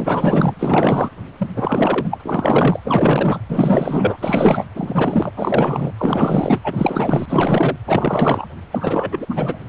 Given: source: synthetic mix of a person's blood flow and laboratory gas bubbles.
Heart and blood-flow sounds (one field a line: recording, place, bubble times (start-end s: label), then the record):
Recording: Doppler ultrasound of blood flow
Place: precordium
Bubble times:
0.00-0.54 s: bubbles
0.59-1.10 s: bubbles
1.38-1.47 s: bubbles
1.54-2.21 s: bubbles
2.24-2.79 s: bubbles
2.84-3.40 s: bubbles
3.48-4.17 s: bubbles
4.20-4.64 s: bubbles
4.75-5.31 s: bubbles
5.37-5.91 s: bubbles
5.97-6.59 s: bubbles
6.64-7.25 s: bubbles
7.28-7.76 s: bubbles
7.87-8.46 s: bubbles
8.71-9.26 s: bubbles
9.29-9.59 s: bubbles
From the record:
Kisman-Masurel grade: 444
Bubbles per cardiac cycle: continuous sound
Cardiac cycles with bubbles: 100%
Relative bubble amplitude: maximal (0.775 to 0.999)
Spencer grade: 4 (maximum detectable bubble signal sounding continuously throughout systole and diastole of every cardiac period, and overriding the amplitude of the normal cardiac signals)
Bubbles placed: anywhere in the cardiac cycle